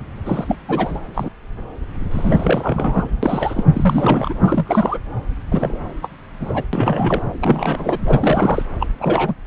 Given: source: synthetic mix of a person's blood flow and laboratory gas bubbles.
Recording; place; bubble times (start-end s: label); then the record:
Doppler ultrasound of blood flow; subclavian vein
0.26-0.55 s: bubbles
0.68-0.99 s: bubbles
1.14-1.29 s: bubbles
2.11-3.10 s: bubbles
3.23-3.65 s: bubbles
3.73-4.33 s: bubbles
4.41-4.99 s: bubbles
5.51-5.78 s: bubbles
6.01-6.08 s: bubbles
6.39-6.63 s: bubbles
6.73-7.22 s: bubbles
7.40-7.99 s: bubbles
8.07-8.63 s: bubbles
8.80-8.87 s: bubbles
9.00-9.35 s: bubbles
From the record:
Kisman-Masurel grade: 332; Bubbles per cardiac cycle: rolling drumbeat, 9 or more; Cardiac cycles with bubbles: 50 to 99%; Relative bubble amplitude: moderate (0.250 to 0.450); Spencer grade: 3 (all of the cardiac periods contain showers or single bubble signals, but not dominating or overriding the cardiac motion signals); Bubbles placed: anywhere in the cardiac cycle